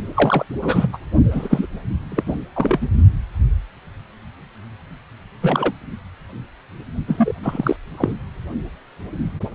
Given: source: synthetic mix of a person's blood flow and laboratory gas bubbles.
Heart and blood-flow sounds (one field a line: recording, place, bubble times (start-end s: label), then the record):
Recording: Doppler ultrasound of blood flow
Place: precordium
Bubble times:
0.14-0.46 s: bubbles
0.61-0.90 s: bubbles
0.92-0.98 s: bubbles
1.30-1.67 s: bubbles
2.12-2.35 s: bubbles
2.56-2.89 s: bubbles
5.42-5.73 s: bubbles
7.08-7.33 s: bubbles
7.42-7.76 s: bubbles
7.97-8.12 s: bubbles
From the record:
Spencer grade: 3 (all of the cardiac periods contain showers or single bubble signals, but not dominating or overriding the cardiac motion signals)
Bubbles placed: only in the low amplitude regions of the cardiac cycle